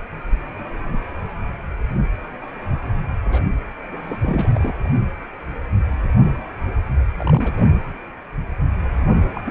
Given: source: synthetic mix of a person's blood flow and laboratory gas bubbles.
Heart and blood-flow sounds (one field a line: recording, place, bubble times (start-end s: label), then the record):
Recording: Doppler ultrasound of blood flow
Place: precordium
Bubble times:
0.59-0.67 s: bubbles
3.25-3.41 s: bubbles
3.89-4.17 s: bubbles
4.22-4.73 s: bubbles
4.84-4.90 s: bubbles
7.15-7.54 s: bubbles
7.58-7.67 s: bubbles
9.34-9.41 s: bubbles
9.45-9.51 s: bubbles
From the record:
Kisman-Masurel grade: 221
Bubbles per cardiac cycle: several, 3 to 8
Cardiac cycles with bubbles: 10 to 50%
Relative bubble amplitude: barely perceptible (0.100 to 0.250)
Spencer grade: 2 (many but less than half of the cardiac periods contain bubble signals, singularly or in groups)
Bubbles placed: anywhere in the cardiac cycle